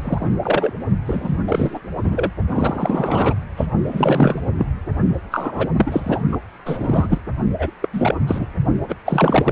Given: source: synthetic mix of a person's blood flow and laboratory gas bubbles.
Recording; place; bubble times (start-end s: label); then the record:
Doppler ultrasound of blood flow; precordium
0.00-0.28 s: bubbles
0.42-0.73 s: bubbles
1.06-1.41 s: bubbles
1.47-1.80 s: bubbles
2.04-2.31 s: bubbles
2.50-3.35 s: bubbles
3.56-3.67 s: bubbles
3.85-4.40 s: bubbles
4.57-4.66 s: bubbles
5.30-5.68 s: bubbles
5.76-6.20 s: bubbles
6.31-6.38 s: bubbles
6.65-7.17 s: bubbles
7.58-7.70 s: bubbles
7.82-7.88 s: bubbles
7.92-8.15 s: bubbles
8.27-8.45 s: bubbles
8.88-8.96 s: bubbles
9.05-9.52 s: bubbles
From the record:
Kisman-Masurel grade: 343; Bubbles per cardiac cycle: rolling drumbeat, 9 or more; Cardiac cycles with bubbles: 100%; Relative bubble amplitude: loud (0.450 to 0.775); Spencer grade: 3 (all of the cardiac periods contain showers or single bubble signals, but not dominating or overriding the cardiac motion signals); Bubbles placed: only in the low amplitude regions of the cardiac cycle